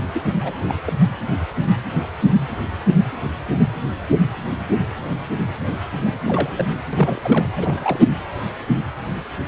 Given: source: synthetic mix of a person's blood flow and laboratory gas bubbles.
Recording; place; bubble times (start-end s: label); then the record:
Doppler ultrasound of blood flow; precordium
0.13-0.22 s: bubbles
0.41-0.53 s: bubbles
0.67-0.74 s: bubbles
0.87-0.93 s: bubbles
6.04-6.19 s: bubbles
6.24-6.65 s: bubbles
6.71-6.75 s: bubbles
6.92-7.46 s: bubbles
7.56-8.00 s: bubbles
From the record:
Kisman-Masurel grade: 221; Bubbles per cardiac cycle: several, 3 to 8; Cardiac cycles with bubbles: 10 to 50%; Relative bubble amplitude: barely perceptible (0.100 to 0.250); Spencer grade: 2 (many but less than half of the cardiac periods contain bubble signals, singularly or in groups); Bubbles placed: anywhere in the cardiac cycle